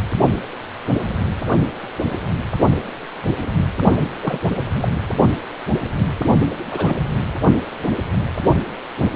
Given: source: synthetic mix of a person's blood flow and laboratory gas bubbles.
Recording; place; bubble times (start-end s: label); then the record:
Doppler ultrasound of blood flow; precordium
4.21-4.47 s: bubbles
4.80-4.89 s: bubbles
6.71-6.94 s: bubbles
From the record:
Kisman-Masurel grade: 122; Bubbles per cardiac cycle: 1 to 2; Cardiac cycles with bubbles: 10 to 50%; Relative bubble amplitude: moderate (0.250 to 0.450); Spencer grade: 2 (many but less than half of the cardiac periods contain bubble signals, singularly or in groups); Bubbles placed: only in the low amplitude regions of the cardiac cycle